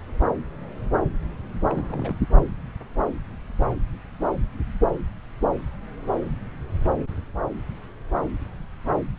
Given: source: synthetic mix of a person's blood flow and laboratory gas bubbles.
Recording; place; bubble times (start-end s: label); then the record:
Doppler ultrasound of blood flow; subclavian vein
1.66-2.16 s: bubbles
From the record:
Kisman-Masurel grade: 211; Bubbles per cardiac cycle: several, 3 to 8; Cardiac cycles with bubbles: 1 to 10%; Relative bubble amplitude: barely perceptible (0.100 to 0.250); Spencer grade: 1 (occasional bubble signal discernible with the cardiac motion signal, with majority of cardiac periods free of bubbles); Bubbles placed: anywhere in the cardiac cycle